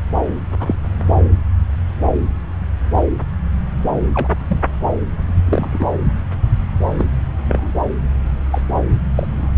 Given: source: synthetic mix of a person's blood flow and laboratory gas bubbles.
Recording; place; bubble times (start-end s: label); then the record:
Doppler ultrasound of blood flow; subclavian vein
0.59-0.76 s: bubbles
2.96-3.02 s: bubbles
4.14-4.28 s: bubbles
4.48-4.61 s: bubbles
5.46-5.86 s: bubbles
6.98-7.06 s: bubbles
7.49-7.71 s: bubbles
8.51-8.61 s: bubbles
9.15-9.27 s: bubbles
9.39-9.47 s: bubbles
From the record:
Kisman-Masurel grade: 122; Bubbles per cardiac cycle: 1 to 2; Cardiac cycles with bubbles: 10 to 50%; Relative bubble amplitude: moderate (0.250 to 0.450); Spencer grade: 2 (many but less than half of the cardiac periods contain bubble signals, singularly or in groups); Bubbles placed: anywhere in the cardiac cycle